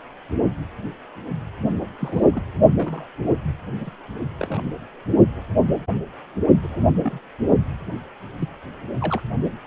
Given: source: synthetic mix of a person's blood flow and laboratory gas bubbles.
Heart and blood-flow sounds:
Doppler ultrasound of blood flow; precordium
1.99-2.42 s: bubbles
2.79-3.06 s: bubbles
3.80-3.90 s: bubbles
4.39-4.62 s: bubbles
6.62-6.90 s: bubbles
7.02-7.19 s: bubbles
8.39-8.48 s: bubbles
9.00-9.21 s: bubbles
From the record:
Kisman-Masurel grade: 121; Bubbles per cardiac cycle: 1 to 2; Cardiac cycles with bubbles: 10 to 50%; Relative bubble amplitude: barely perceptible (0.100 to 0.250); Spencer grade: 2 (many but less than half of the cardiac periods contain bubble signals, singularly or in groups); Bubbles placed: only in the low amplitude regions of the cardiac cycle

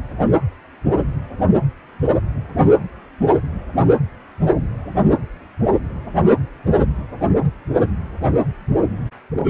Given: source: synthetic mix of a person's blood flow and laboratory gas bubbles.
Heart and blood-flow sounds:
Doppler ultrasound of blood flow; precordium
no bubbles
From the record:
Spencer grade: 0 (complete lack of bubble signals)

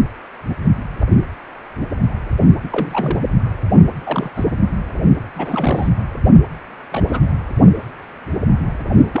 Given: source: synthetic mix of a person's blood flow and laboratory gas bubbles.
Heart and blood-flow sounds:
Doppler ultrasound of blood flow; precordium
2.63-3.23 s: bubbles
4.06-4.30 s: bubbles
4.35-4.45 s: bubbles
5.35-5.89 s: bubbles
6.92-7.21 s: bubbles
9.13-9.20 s: bubbles
From the record:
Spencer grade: 2 (many but less than half of the cardiac periods contain bubble signals, singularly or in groups); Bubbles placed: anywhere in the cardiac cycle

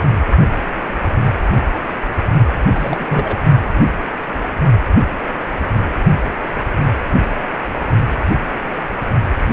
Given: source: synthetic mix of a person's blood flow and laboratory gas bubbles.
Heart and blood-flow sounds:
Doppler ultrasound of blood flow; precordium
2.75-3.07 s: bubbles
3.10-3.37 s: bubbles
From the record:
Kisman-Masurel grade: 212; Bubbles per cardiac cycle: several, 3 to 8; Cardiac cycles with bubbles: 1 to 10%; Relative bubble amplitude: moderate (0.250 to 0.450); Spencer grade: 1 (occasional bubble signal discernible with the cardiac motion signal, with majority of cardiac periods free of bubbles); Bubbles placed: only in the low amplitude regions of the cardiac cycle

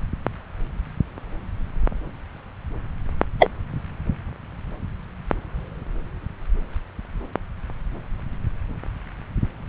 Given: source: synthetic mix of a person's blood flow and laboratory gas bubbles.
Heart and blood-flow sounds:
Doppler ultrasound of blood flow; subclavian vein
3.39-3.49 s: bubbles
From the record:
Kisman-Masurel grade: 113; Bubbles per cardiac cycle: 1 to 2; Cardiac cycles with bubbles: 1 to 10%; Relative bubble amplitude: loud (0.450 to 0.775); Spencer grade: 1 (occasional bubble signal discernible with the cardiac motion signal, with majority of cardiac periods free of bubbles); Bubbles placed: anywhere in the cardiac cycle

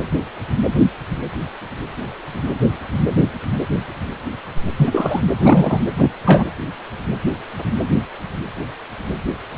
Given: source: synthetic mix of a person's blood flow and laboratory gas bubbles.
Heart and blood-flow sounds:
Doppler ultrasound of blood flow; precordium
4.76-5.21 s: bubbles
5.39-5.80 s: bubbles
5.96-6.10 s: bubbles
6.25-6.46 s: bubbles
From the record:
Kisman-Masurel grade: 223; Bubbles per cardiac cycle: several, 3 to 8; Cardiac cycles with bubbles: 10 to 50%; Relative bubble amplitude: loud (0.450 to 0.775); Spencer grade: 2 (many but less than half of the cardiac periods contain bubble signals, singularly or in groups); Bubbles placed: anywhere in the cardiac cycle

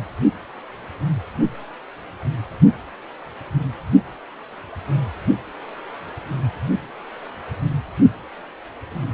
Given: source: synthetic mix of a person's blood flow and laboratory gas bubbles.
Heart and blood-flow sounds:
Doppler ultrasound of blood flow; precordium
no bubbles
From the record:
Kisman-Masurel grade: 000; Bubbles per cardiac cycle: 0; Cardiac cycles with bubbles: 0%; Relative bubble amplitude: no bubbles discernible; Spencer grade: 0 (complete lack of bubble signals)

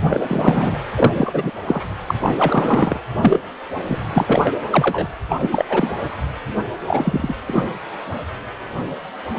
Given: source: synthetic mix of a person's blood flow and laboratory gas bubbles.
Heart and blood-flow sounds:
Doppler ultrasound of blood flow; precordium
0.00-0.78 s: bubbles
0.96-1.51 s: bubbles
1.67-1.86 s: bubbles
2.06-2.15 s: bubbles
2.20-2.99 s: bubbles
3.21-3.40 s: bubbles
3.87-4.04 s: bubbles
4.12-4.55 s: bubbles
4.71-5.08 s: bubbles
5.29-5.36 s: bubbles
5.41-5.65 s: bubbles
5.69-5.98 s: bubbles
6.87-7.35 s: bubbles
7.46-7.62 s: bubbles
From the record:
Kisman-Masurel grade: 233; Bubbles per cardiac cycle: several, 3 to 8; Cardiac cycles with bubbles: 50 to 99%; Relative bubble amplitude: loud (0.450 to 0.775); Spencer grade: 3 (all of the cardiac periods contain showers or single bubble signals, but not dominating or overriding the cardiac motion signals); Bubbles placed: anywhere in the cardiac cycle

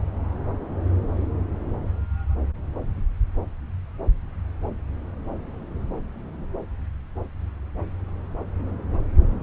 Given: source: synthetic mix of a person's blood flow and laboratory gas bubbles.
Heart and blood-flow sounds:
Doppler ultrasound of blood flow; subclavian vein
no bubbles
From the record:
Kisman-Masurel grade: 000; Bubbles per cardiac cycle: 0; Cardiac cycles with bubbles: 0%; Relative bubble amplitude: no bubbles discernible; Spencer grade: 0 (complete lack of bubble signals)

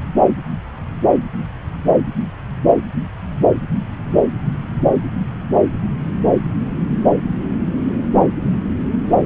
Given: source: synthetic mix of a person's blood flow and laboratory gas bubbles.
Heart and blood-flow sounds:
Doppler ultrasound of blood flow; subclavian vein
no bubbles
From the record:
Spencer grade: 0 (complete lack of bubble signals)

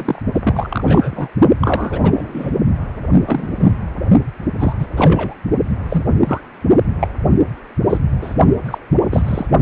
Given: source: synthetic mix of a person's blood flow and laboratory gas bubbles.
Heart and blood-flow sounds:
Doppler ultrasound of blood flow; precordium
0.00-0.22 s: bubbles
0.34-1.28 s: bubbles
1.61-1.99 s: bubbles
2.02-2.51 s: bubbles
3.25-3.77 s: bubbles
4.59-4.73 s: bubbles
4.79-4.87 s: bubbles
4.97-5.36 s: bubbles
5.89-6.05 s: bubbles
6.24-6.41 s: bubbles
7.01-7.08 s: bubbles
7.90-7.99 s: bubbles
8.21-8.34 s: bubbles
8.65-8.78 s: bubbles
9.11-9.46 s: bubbles
From the record:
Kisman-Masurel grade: 243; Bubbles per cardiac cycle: several, 3 to 8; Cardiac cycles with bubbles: 100%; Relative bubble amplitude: loud (0.450 to 0.775); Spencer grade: 3 (all of the cardiac periods contain showers or single bubble signals, but not dominating or overriding the cardiac motion signals); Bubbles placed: only in the low amplitude regions of the cardiac cycle

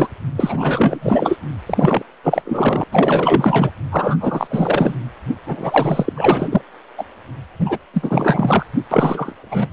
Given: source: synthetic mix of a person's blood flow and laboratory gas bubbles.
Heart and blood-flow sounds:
Doppler ultrasound of blood flow; precordium
0.00-0.07 s: bubbles
0.36-1.39 s: bubbles
1.67-2.03 s: bubbles
2.24-2.84 s: bubbles
2.92-3.71 s: bubbles
3.92-4.17 s: bubbles
4.20-4.96 s: bubbles
5.46-6.62 s: bubbles
6.97-7.04 s: bubbles
7.59-7.78 s: bubbles
7.94-8.66 s: bubbles
8.91-9.33 s: bubbles
9.42-9.69 s: bubbles
From the record:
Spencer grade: 4 (maximum detectable bubble signal sounding continuously throughout systole and diastole of every cardiac period, and overriding the amplitude of the normal cardiac signals); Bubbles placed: anywhere in the cardiac cycle

